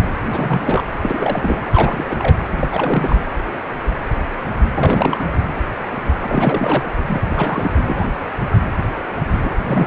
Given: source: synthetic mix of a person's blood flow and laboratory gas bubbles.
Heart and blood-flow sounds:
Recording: Doppler ultrasound of blood flow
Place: precordium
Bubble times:
0.25-0.62 s: bubbles
0.65-0.84 s: bubbles
1.01-1.60 s: bubbles
1.71-2.05 s: bubbles
2.09-2.43 s: bubbles
2.60-2.68 s: bubbles
2.72-3.16 s: bubbles
4.76-5.26 s: bubbles
6.20-6.88 s: bubbles
7.07-7.24 s: bubbles
7.27-7.75 s: bubbles
7.85-8.04 s: bubbles
9.42-9.56 s: bubbles
9.63-9.87 s: bubbles
From the record:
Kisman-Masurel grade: 332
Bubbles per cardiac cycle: rolling drumbeat, 9 or more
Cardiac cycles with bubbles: 50 to 99%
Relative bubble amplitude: moderate (0.250 to 0.450)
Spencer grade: 3 (all of the cardiac periods contain showers or single bubble signals, but not dominating or overriding the cardiac motion signals)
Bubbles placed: anywhere in the cardiac cycle

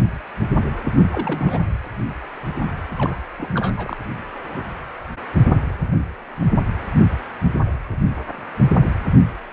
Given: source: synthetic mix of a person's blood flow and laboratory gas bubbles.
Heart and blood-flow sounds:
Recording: Doppler ultrasound of blood flow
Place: precordium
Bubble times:
1.12-1.67 s: bubbles
2.98-3.16 s: bubbles
3.38-3.72 s: bubbles
3.77-3.97 s: bubbles
From the record:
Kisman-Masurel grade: 221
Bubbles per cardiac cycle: several, 3 to 8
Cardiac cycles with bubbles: 10 to 50%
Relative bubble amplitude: barely perceptible (0.100 to 0.250)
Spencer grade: 2 (many but less than half of the cardiac periods contain bubble signals, singularly or in groups)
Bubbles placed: anywhere in the cardiac cycle

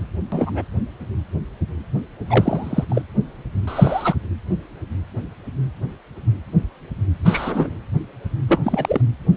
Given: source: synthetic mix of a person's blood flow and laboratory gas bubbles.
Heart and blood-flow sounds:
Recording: Doppler ultrasound of blood flow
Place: precordium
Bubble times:
0.32-0.64 s: bubbles
2.29-2.85 s: bubbles
2.90-3.02 s: bubbles
3.67-4.15 s: bubbles
7.25-7.72 s: bubbles
8.48-8.60 s: bubbles
8.63-9.01 s: bubbles
From the record:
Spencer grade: 2 (many but less than half of the cardiac periods contain bubble signals, singularly or in groups)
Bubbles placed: anywhere in the cardiac cycle

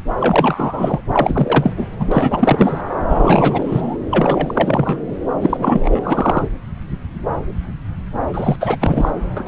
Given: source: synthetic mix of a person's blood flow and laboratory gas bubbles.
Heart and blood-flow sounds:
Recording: Doppler ultrasound of blood flow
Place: subclavian vein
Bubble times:
0.20-1.01 s: bubbles
1.13-1.73 s: bubbles
1.77-1.87 s: bubbles
1.99-2.81 s: bubbles
3.10-3.98 s: bubbles
4.10-4.98 s: bubbles
5.41-6.46 s: bubbles
8.33-8.56 s: bubbles
8.60-8.76 s: bubbles
8.80-9.11 s: bubbles
9.37-9.43 s: bubbles
9.46-9.48 s: bubbles
From the record:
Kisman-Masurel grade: 333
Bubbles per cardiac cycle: rolling drumbeat, 9 or more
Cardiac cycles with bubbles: 50 to 99%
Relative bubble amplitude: loud (0.450 to 0.775)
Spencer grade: 3 (all of the cardiac periods contain showers or single bubble signals, but not dominating or overriding the cardiac motion signals)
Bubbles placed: anywhere in the cardiac cycle

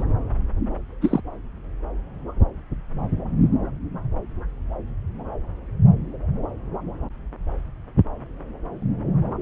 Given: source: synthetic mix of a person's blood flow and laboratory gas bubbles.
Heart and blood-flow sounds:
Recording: Doppler ultrasound of blood flow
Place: subclavian vein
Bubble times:
0.00-0.04 s: bubbles
1.01-1.21 s: bubbles
From the record:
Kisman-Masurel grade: 122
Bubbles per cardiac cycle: 1 to 2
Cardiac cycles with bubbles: 10 to 50%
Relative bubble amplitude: moderate (0.250 to 0.450)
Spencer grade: 2 (many but less than half of the cardiac periods contain bubble signals, singularly or in groups)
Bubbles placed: anywhere in the cardiac cycle

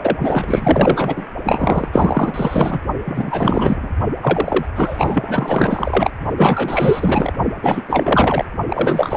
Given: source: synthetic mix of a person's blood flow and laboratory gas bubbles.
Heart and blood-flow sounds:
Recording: Doppler ultrasound of blood flow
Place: precordium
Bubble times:
0.03-0.17 s: bubbles
0.20-1.26 s: bubbles
1.44-1.89 s: bubbles
1.93-2.79 s: bubbles
3.04-3.89 s: bubbles
4.21-4.66 s: bubbles
4.75-6.11 s: bubbles
6.37-7.33 s: bubbles
7.62-7.81 s: bubbles
7.88-8.45 s: bubbles
8.67-9.16 s: bubbles
From the record:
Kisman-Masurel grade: 444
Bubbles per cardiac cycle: continuous sound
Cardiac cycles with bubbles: 100%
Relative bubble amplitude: maximal (0.775 to 0.999)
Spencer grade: 4 (maximum detectable bubble signal sounding continuously throughout systole and diastole of every cardiac period, and overriding the amplitude of the normal cardiac signals)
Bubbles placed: only in the low amplitude regions of the cardiac cycle

